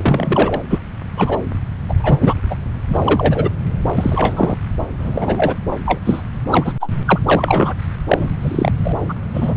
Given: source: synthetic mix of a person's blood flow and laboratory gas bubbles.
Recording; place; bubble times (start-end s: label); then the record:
Doppler ultrasound of blood flow; subclavian vein
0.00-0.61 s: bubbles
0.69-0.79 s: bubbles
1.17-1.39 s: bubbles
1.89-2.35 s: bubbles
2.50-2.58 s: bubbles
2.88-3.50 s: bubbles
3.97-4.58 s: bubbles
4.99-5.57 s: bubbles
5.85-6.01 s: bubbles
6.05-6.22 s: bubbles
6.47-6.73 s: bubbles
6.80-6.90 s: bubbles
7.06-7.19 s: bubbles
7.26-7.74 s: bubbles
8.08-8.29 s: bubbles
8.41-8.72 s: bubbles
8.84-8.93 s: bubbles
9.09-9.14 s: bubbles
9.34-9.55 s: bubbles
From the record:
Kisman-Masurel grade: 243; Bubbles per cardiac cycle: several, 3 to 8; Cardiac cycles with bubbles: 100%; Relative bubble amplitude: loud (0.450 to 0.775); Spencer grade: 3 (all of the cardiac periods contain showers or single bubble signals, but not dominating or overriding the cardiac motion signals); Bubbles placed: anywhere in the cardiac cycle